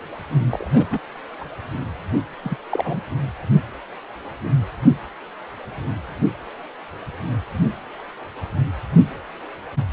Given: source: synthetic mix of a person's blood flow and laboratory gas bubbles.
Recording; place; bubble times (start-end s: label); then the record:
Doppler ultrasound of blood flow; precordium
0.50-0.70 s: bubbles
0.73-0.86 s: bubbles
0.90-0.99 s: bubbles
1.41-1.44 s: bubbles
2.43-2.57 s: bubbles
2.71-3.00 s: bubbles
From the record:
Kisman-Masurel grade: 221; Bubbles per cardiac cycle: several, 3 to 8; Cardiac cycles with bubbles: 10 to 50%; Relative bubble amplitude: barely perceptible (0.100 to 0.250); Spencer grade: 2 (many but less than half of the cardiac periods contain bubble signals, singularly or in groups); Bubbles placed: anywhere in the cardiac cycle